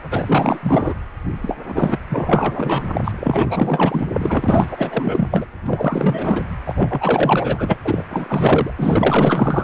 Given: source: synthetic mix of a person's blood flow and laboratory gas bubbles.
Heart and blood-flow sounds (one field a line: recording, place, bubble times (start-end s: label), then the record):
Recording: Doppler ultrasound of blood flow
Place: precordium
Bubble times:
0.10-0.94 s: bubbles
1.41-1.56 s: bubbles
1.66-1.98 s: bubbles
2.08-3.01 s: bubbles
3.04-3.12 s: bubbles
3.19-4.07 s: bubbles
4.13-5.46 s: bubbles
5.66-6.43 s: bubbles
6.65-7.79 s: bubbles
7.85-8.04 s: bubbles
8.10-8.71 s: bubbles
8.76-9.64 s: bubbles
From the record:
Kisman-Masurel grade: 444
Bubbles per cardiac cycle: continuous sound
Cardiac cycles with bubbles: 100%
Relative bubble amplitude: maximal (0.775 to 0.999)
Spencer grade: 4 (maximum detectable bubble signal sounding continuously throughout systole and diastole of every cardiac period, and overriding the amplitude of the normal cardiac signals)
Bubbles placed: anywhere in the cardiac cycle